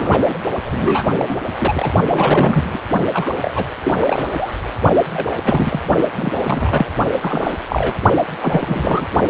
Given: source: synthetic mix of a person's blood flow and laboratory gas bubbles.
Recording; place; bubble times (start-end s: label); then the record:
Doppler ultrasound of blood flow; precordium
0.00-0.38 s: bubbles
0.65-1.38 s: bubbles
1.61-1.93 s: bubbles
2.07-2.79 s: bubbles
3.12-3.30 s: bubbles
3.42-3.66 s: bubbles
3.84-3.94 s: bubbles
4.00-4.60 s: bubbles
5.13-5.28 s: bubbles
5.44-5.81 s: bubbles
6.16-6.87 s: bubbles
7.21-7.53 s: bubbles
7.69-7.94 s: bubbles
8.42-9.06 s: bubbles
From the record:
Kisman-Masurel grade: 342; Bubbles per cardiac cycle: rolling drumbeat, 9 or more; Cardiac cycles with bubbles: 100%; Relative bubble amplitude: moderate (0.250 to 0.450); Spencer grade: 3 (all of the cardiac periods contain showers or single bubble signals, but not dominating or overriding the cardiac motion signals); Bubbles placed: only in the low amplitude regions of the cardiac cycle